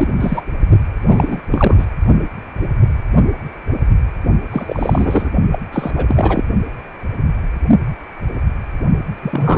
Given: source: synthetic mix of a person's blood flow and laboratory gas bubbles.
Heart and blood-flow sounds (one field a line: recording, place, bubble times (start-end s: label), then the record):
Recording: Doppler ultrasound of blood flow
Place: precordium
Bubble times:
0.00-0.08 s: bubbles
0.20-0.42 s: bubbles
1.07-1.41 s: bubbles
1.51-1.85 s: bubbles
4.52-5.30 s: bubbles
5.52-5.60 s: bubbles
5.72-5.91 s: bubbles
5.95-6.42 s: bubbles
9.22-9.57 s: bubbles
From the record:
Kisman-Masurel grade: 333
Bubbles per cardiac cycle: rolling drumbeat, 9 or more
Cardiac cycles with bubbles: 50 to 99%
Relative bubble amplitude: loud (0.450 to 0.775)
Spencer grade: 3 (all of the cardiac periods contain showers or single bubble signals, but not dominating or overriding the cardiac motion signals)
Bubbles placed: only in the low amplitude regions of the cardiac cycle